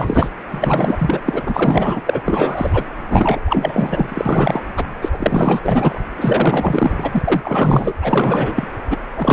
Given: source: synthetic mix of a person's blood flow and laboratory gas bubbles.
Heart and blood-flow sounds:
Doppler ultrasound of blood flow; precordium
0.00-0.29 s: bubbles
0.48-1.21 s: bubbles
1.25-2.01 s: bubbles
2.05-2.21 s: bubbles
2.25-2.85 s: bubbles
3.08-3.40 s: bubbles
3.46-4.66 s: bubbles
4.77-4.85 s: bubbles
5.02-5.61 s: bubbles
5.63-6.01 s: bubbles
6.17-7.42 s: bubbles
7.45-7.94 s: bubbles
8.02-8.68 s: bubbles
8.89-8.98 s: bubbles
9.17-9.33 s: bubbles
From the record:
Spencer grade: 4 (maximum detectable bubble signal sounding continuously throughout systole and diastole of every cardiac period, and overriding the amplitude of the normal cardiac signals); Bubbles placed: anywhere in the cardiac cycle

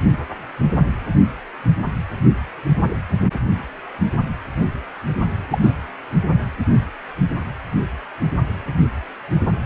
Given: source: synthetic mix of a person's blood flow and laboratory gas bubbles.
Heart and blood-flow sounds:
Doppler ultrasound of blood flow; precordium
5.50-5.58 s: bubbles
5.62-5.74 s: bubbles
From the record:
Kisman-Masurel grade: 112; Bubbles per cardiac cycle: 1 to 2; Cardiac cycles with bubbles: 1 to 10%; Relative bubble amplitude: moderate (0.250 to 0.450); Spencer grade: 1 (occasional bubble signal discernible with the cardiac motion signal, with majority of cardiac periods free of bubbles); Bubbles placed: anywhere in the cardiac cycle

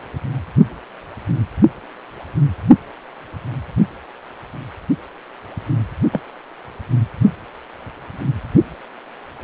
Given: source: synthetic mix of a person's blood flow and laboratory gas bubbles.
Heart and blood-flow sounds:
Doppler ultrasound of blood flow; precordium
6.12-6.20 s: bubbles
From the record:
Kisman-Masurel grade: 113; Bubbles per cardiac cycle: 1 to 2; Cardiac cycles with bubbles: 1 to 10%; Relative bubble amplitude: loud (0.450 to 0.775); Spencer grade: 1 (occasional bubble signal discernible with the cardiac motion signal, with majority of cardiac periods free of bubbles); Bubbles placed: only in the low amplitude regions of the cardiac cycle

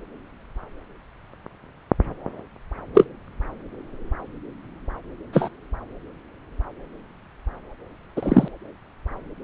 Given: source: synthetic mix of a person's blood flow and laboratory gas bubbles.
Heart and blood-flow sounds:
Doppler ultrasound of blood flow; subclavian vein
2.94-3.05 s: bubbles
5.33-5.49 s: bubbles
8.16-8.48 s: bubbles
From the record:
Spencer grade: 2 (many but less than half of the cardiac periods contain bubble signals, singularly or in groups); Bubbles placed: anywhere in the cardiac cycle

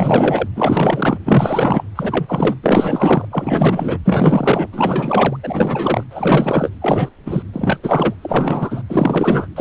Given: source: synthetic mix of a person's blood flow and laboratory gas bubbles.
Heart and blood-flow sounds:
Doppler ultrasound of blood flow; precordium
0.00-0.48 s: bubbles
0.56-1.19 s: bubbles
1.25-1.84 s: bubbles
1.95-2.55 s: bubbles
2.63-3.25 s: bubbles
3.31-3.98 s: bubbles
4.04-4.68 s: bubbles
4.72-5.36 s: bubbles
5.43-6.03 s: bubbles
6.10-6.70 s: bubbles
6.81-7.10 s: bubbles
7.25-7.42 s: bubbles
7.53-7.79 s: bubbles
7.83-8.14 s: bubbles
8.21-8.83 s: bubbles
8.89-9.47 s: bubbles
9.56-9.61 s: bubbles
From the record:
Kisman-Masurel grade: 444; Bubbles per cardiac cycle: continuous sound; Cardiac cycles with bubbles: 100%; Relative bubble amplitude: maximal (0.775 to 0.999); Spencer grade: 4 (maximum detectable bubble signal sounding continuously throughout systole and diastole of every cardiac period, and overriding the amplitude of the normal cardiac signals); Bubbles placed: anywhere in the cardiac cycle

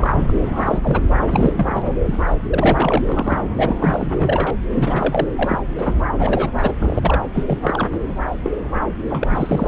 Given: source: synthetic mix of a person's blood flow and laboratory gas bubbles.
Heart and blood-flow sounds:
Doppler ultrasound of blood flow; subclavian vein
0.00-0.38 s: bubbles
0.42-1.00 s: bubbles
1.29-1.91 s: bubbles
2.05-2.18 s: bubbles
2.50-3.43 s: bubbles
3.58-3.75 s: bubbles
3.79-4.12 s: bubbles
4.16-4.56 s: bubbles
4.70-5.28 s: bubbles
5.37-5.59 s: bubbles
5.77-5.94 s: bubbles
6.19-6.51 s: bubbles
6.56-6.73 s: bubbles
6.80-7.23 s: bubbles
7.34-7.44 s: bubbles
7.46-7.59 s: bubbles
7.64-7.88 s: bubbles
8.06-8.13 s: bubbles
8.43-8.50 s: bubbles
9.11-9.28 s: bubbles
9.30-9.68 s: bubbles
From the record:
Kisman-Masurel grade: 342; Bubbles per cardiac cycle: rolling drumbeat, 9 or more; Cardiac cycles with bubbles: 100%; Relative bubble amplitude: moderate (0.250 to 0.450); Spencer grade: 3 (all of the cardiac periods contain showers or single bubble signals, but not dominating or overriding the cardiac motion signals); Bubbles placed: anywhere in the cardiac cycle

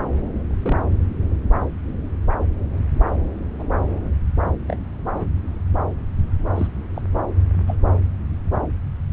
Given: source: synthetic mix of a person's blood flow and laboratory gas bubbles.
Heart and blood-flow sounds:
Doppler ultrasound of blood flow; subclavian vein
0.48-0.83 s: bubbles
3.59-3.64 s: bubbles
4.68-4.78 s: bubbles
5.13-5.25 s: bubbles
6.56-6.67 s: bubbles
6.94-7.02 s: bubbles
7.67-7.76 s: bubbles
From the record:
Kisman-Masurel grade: 121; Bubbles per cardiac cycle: 1 to 2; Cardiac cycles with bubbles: 10 to 50%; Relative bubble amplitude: barely perceptible (0.100 to 0.250); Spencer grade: 2 (many but less than half of the cardiac periods contain bubble signals, singularly or in groups); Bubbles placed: anywhere in the cardiac cycle

